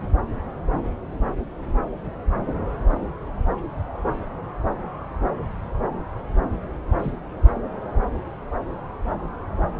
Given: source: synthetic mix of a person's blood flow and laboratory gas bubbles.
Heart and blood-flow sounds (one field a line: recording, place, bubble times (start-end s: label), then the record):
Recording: Doppler ultrasound of blood flow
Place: subclavian vein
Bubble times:
6.99-7.12 s: bubbles
From the record:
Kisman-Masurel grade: 111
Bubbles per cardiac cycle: 1 to 2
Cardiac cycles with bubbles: 1 to 10%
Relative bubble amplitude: barely perceptible (0.100 to 0.250)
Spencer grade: 1 (occasional bubble signal discernible with the cardiac motion signal, with majority of cardiac periods free of bubbles)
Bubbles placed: anywhere in the cardiac cycle